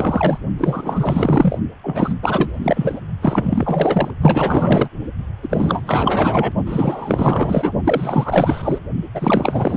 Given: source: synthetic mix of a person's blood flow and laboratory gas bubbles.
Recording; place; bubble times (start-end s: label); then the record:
Doppler ultrasound of blood flow; precordium
0.00-0.40 s: bubbles
0.58-1.58 s: bubbles
1.83-2.14 s: bubbles
2.22-3.00 s: bubbles
3.21-4.11 s: bubbles
4.21-4.88 s: bubbles
5.42-6.52 s: bubbles
6.66-7.72 s: bubbles
7.83-8.78 s: bubbles
9.14-9.77 s: bubbles
From the record:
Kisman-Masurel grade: 444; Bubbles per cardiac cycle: continuous sound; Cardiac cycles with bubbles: 100%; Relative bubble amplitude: maximal (0.775 to 0.999); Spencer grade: 4 (maximum detectable bubble signal sounding continuously throughout systole and diastole of every cardiac period, and overriding the amplitude of the normal cardiac signals); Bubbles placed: only in the low amplitude regions of the cardiac cycle